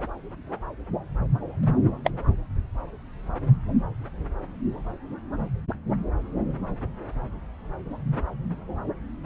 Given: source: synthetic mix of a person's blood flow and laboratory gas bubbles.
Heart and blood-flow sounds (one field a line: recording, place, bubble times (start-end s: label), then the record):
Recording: Doppler ultrasound of blood flow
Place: subclavian vein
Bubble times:
1.61-1.67 s: bubbles
2.04-2.10 s: bubbles
From the record:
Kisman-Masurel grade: 112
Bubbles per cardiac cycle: 1 to 2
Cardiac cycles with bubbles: 1 to 10%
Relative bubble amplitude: moderate (0.250 to 0.450)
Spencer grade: 1 (occasional bubble signal discernible with the cardiac motion signal, with majority of cardiac periods free of bubbles)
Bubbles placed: anywhere in the cardiac cycle